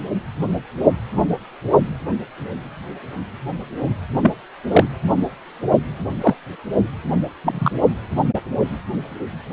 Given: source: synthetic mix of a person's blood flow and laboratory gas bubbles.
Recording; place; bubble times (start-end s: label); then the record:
Doppler ultrasound of blood flow; precordium
4.22-4.31 s: bubbles
4.71-4.84 s: bubbles
6.21-6.35 s: bubbles
7.44-7.70 s: bubbles
From the record:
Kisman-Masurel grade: 123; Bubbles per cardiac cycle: 1 to 2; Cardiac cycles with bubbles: 10 to 50%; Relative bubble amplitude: loud (0.450 to 0.775); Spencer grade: 2 (many but less than half of the cardiac periods contain bubble signals, singularly or in groups); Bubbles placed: anywhere in the cardiac cycle